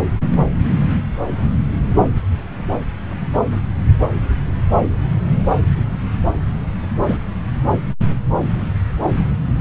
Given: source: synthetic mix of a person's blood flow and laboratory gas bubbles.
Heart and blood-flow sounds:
Doppler ultrasound of blood flow; subclavian vein
7.08-7.18 s: bubbles
From the record:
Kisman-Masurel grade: 113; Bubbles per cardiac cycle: 1 to 2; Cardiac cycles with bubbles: 1 to 10%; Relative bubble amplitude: loud (0.450 to 0.775); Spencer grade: 1 (occasional bubble signal discernible with the cardiac motion signal, with majority of cardiac periods free of bubbles); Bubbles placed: anywhere in the cardiac cycle

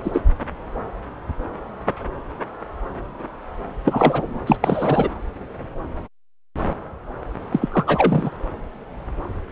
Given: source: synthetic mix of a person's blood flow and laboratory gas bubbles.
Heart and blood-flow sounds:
Doppler ultrasound of blood flow; subclavian vein
0.00-0.21 s: bubbles
3.84-4.39 s: bubbles
4.47-4.57 s: bubbles
4.60-5.08 s: bubbles
7.52-7.68 s: bubbles
7.72-8.30 s: bubbles
From the record:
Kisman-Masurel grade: 222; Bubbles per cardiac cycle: several, 3 to 8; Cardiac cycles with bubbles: 10 to 50%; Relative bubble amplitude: moderate (0.250 to 0.450); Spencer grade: 2 (many but less than half of the cardiac periods contain bubble signals, singularly or in groups); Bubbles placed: anywhere in the cardiac cycle

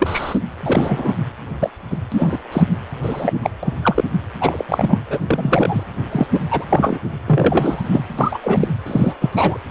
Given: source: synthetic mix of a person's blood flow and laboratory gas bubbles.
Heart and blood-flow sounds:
Doppler ultrasound of blood flow; precordium
0.00-0.40 s: bubbles
0.61-1.15 s: bubbles
1.60-1.70 s: bubbles
1.91-1.97 s: bubbles
2.12-2.39 s: bubbles
2.52-2.66 s: bubbles
3.03-3.33 s: bubbles
3.43-3.50 s: bubbles
3.62-3.73 s: bubbles
3.81-4.04 s: bubbles
4.40-4.63 s: bubbles
4.68-5.03 s: bubbles
5.10-5.19 s: bubbles
5.26-5.83 s: bubbles
6.11-6.27 s: bubbles
6.33-6.39 s: bubbles
6.50-6.65 s: bubbles
6.70-6.99 s: bubbles
7.26-8.04 s: bubbles
8.19-8.39 s: bubbles
8.43-8.68 s: bubbles
8.86-9.13 s: bubbles
9.21-9.57 s: bubbles
From the record:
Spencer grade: 3 (all of the cardiac periods contain showers or single bubble signals, but not dominating or overriding the cardiac motion signals); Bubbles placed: anywhere in the cardiac cycle

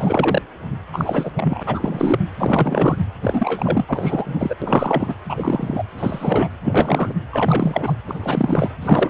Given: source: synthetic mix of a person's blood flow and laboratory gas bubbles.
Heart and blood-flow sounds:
Doppler ultrasound of blood flow; precordium
0.00-0.42 s: bubbles
0.92-1.31 s: bubbles
1.36-1.63 s: bubbles
1.66-2.19 s: bubbles
2.40-2.98 s: bubbles
3.22-4.57 s: bubbles
4.62-5.15 s: bubbles
5.29-5.84 s: bubbles
5.97-6.49 s: bubbles
6.63-7.14 s: bubbles
7.30-7.95 s: bubbles
8.07-8.73 s: bubbles
8.81-9.10 s: bubbles
From the record:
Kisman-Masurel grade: 343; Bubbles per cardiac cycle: rolling drumbeat, 9 or more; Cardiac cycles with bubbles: 100%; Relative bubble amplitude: loud (0.450 to 0.775); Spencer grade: 3 (all of the cardiac periods contain showers or single bubble signals, but not dominating or overriding the cardiac motion signals); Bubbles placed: anywhere in the cardiac cycle

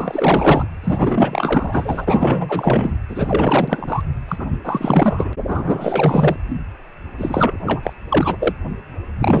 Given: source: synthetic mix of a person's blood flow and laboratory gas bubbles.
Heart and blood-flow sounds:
Doppler ultrasound of blood flow; precordium
0.00-0.67 s: bubbles
0.83-2.96 s: bubbles
3.08-4.03 s: bubbles
4.28-4.46 s: bubbles
4.64-5.33 s: bubbles
5.47-6.36 s: bubbles
7.18-7.93 s: bubbles
8.09-8.53 s: bubbles
9.20-9.40 s: bubbles
From the record:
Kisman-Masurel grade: 444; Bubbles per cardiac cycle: continuous sound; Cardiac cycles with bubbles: 100%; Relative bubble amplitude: maximal (0.775 to 0.999); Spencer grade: 4 (maximum detectable bubble signal sounding continuously throughout systole and diastole of every cardiac period, and overriding the amplitude of the normal cardiac signals); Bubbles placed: anywhere in the cardiac cycle

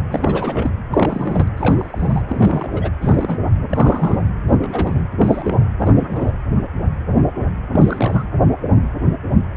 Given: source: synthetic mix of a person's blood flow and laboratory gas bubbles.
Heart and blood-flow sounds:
Doppler ultrasound of blood flow; precordium
0.11-0.70 s: bubbles
0.92-1.48 s: bubbles
1.57-2.21 s: bubbles
2.28-2.69 s: bubbles
2.72-2.90 s: bubbles
3.01-3.38 s: bubbles
3.69-4.28 s: bubbles
4.49-4.58 s: bubbles
4.62-5.03 s: bubbles
5.19-5.65 s: bubbles
5.80-5.93 s: bubbles
5.96-6.33 s: bubbles
7.73-8.24 s: bubbles
From the record:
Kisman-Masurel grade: 232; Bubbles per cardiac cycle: several, 3 to 8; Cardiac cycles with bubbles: 50 to 99%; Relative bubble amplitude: moderate (0.250 to 0.450); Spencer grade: 3 (all of the cardiac periods contain showers or single bubble signals, but not dominating or overriding the cardiac motion signals); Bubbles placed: anywhere in the cardiac cycle

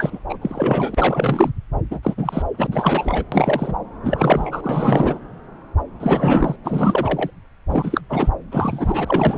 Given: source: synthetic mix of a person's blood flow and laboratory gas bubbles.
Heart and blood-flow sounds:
Doppler ultrasound of blood flow; subclavian vein
0.00-0.19 s: bubbles
0.29-0.38 s: bubbles
0.41-1.50 s: bubbles
1.90-2.00 s: bubbles
2.03-2.15 s: bubbles
2.17-2.42 s: bubbles
2.57-2.67 s: bubbles
2.71-3.25 s: bubbles
3.32-3.74 s: bubbles
4.04-5.19 s: bubbles
6.00-6.56 s: bubbles
6.64-7.30 s: bubbles
7.69-8.01 s: bubbles
8.09-8.29 s: bubbles
8.52-9.38 s: bubbles
From the record:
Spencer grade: 3 (all of the cardiac periods contain showers or single bubble signals, but not dominating or overriding the cardiac motion signals); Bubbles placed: anywhere in the cardiac cycle

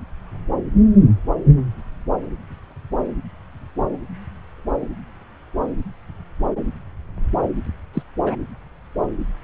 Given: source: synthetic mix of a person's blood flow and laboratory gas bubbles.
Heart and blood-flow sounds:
Doppler ultrasound of blood flow; subclavian vein
7.94-8.03 s: bubbles
8.26-8.36 s: bubbles
From the record:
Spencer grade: 1 (occasional bubble signal discernible with the cardiac motion signal, with majority of cardiac periods free of bubbles); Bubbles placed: anywhere in the cardiac cycle

